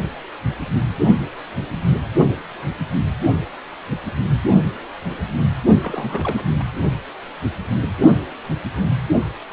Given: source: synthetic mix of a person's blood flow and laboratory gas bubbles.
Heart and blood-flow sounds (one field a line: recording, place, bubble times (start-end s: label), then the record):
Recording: Doppler ultrasound of blood flow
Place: precordium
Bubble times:
5.82-6.45 s: bubbles
6.58-6.65 s: bubbles
From the record:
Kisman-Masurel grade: 221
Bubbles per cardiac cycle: several, 3 to 8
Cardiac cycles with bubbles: 10 to 50%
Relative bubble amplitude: barely perceptible (0.100 to 0.250)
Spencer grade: 2 (many but less than half of the cardiac periods contain bubble signals, singularly or in groups)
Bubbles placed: only in the low amplitude regions of the cardiac cycle